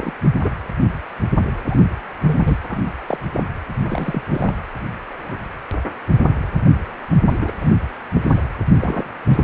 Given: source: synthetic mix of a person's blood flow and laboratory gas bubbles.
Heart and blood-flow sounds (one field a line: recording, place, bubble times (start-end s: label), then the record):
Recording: Doppler ultrasound of blood flow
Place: precordium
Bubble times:
0.00-0.13 s: bubbles
0.23-0.28 s: bubbles
0.43-0.51 s: bubbles
1.65-1.80 s: bubbles
2.25-2.57 s: bubbles
2.69-2.78 s: bubbles
3.08-3.17 s: bubbles
3.33-3.44 s: bubbles
3.83-4.22 s: bubbles
4.31-4.54 s: bubbles
7.29-7.51 s: bubbles
7.61-7.71 s: bubbles
8.14-8.41 s: bubbles
8.76-9.04 s: bubbles
9.29-9.44 s: bubbles
From the record:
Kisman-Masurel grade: 232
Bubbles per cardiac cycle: several, 3 to 8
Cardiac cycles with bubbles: 50 to 99%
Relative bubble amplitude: moderate (0.250 to 0.450)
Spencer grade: 3 (all of the cardiac periods contain showers or single bubble signals, but not dominating or overriding the cardiac motion signals)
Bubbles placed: anywhere in the cardiac cycle